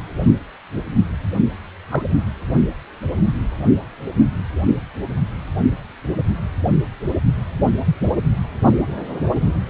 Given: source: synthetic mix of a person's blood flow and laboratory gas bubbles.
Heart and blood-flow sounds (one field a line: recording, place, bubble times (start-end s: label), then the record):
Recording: Doppler ultrasound of blood flow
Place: precordium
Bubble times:
1.91-2.04 s: bubbles
From the record:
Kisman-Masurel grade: 112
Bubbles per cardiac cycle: 1 to 2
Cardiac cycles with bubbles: 1 to 10%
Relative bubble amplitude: moderate (0.250 to 0.450)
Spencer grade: 1 (occasional bubble signal discernible with the cardiac motion signal, with majority of cardiac periods free of bubbles)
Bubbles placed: only in the low amplitude regions of the cardiac cycle